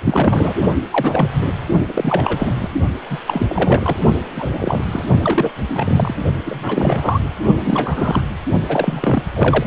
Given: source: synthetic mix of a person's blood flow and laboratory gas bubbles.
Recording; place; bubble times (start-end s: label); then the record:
Doppler ultrasound of blood flow; precordium
0.05-0.57 s: bubbles
0.90-1.29 s: bubbles
1.33-1.48 s: bubbles
1.88-2.69 s: bubbles
3.10-3.19 s: bubbles
3.26-3.46 s: bubbles
3.49-3.97 s: bubbles
4.36-4.83 s: bubbles
4.91-5.05 s: bubbles
5.22-5.52 s: bubbles
5.68-6.15 s: bubbles
6.45-7.20 s: bubbles
7.64-8.24 s: bubbles
8.67-9.22 s: bubbles
9.34-9.66 s: bubbles
From the record:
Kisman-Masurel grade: 342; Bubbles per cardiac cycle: rolling drumbeat, 9 or more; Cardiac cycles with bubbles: 100%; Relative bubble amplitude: moderate (0.250 to 0.450); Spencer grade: 3 (all of the cardiac periods contain showers or single bubble signals, but not dominating or overriding the cardiac motion signals); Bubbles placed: only in the low amplitude regions of the cardiac cycle